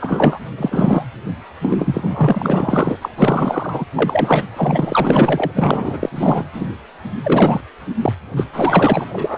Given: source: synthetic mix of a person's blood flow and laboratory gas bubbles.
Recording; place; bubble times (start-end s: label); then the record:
Doppler ultrasound of blood flow; precordium
0.01-0.39 s: bubbles
0.57-1.03 s: bubbles
1.61-2.98 s: bubbles
3.01-3.08 s: bubbles
3.18-3.85 s: bubbles
3.95-4.45 s: bubbles
4.56-5.51 s: bubbles
5.55-6.46 s: bubbles
6.53-6.68 s: bubbles
7.22-7.60 s: bubbles
8.01-8.13 s: bubbles
8.36-8.45 s: bubbles
8.53-9.05 s: bubbles
9.10-9.37 s: bubbles
From the record:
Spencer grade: 4 (maximum detectable bubble signal sounding continuously throughout systole and diastole of every cardiac period, and overriding the amplitude of the normal cardiac signals); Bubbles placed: anywhere in the cardiac cycle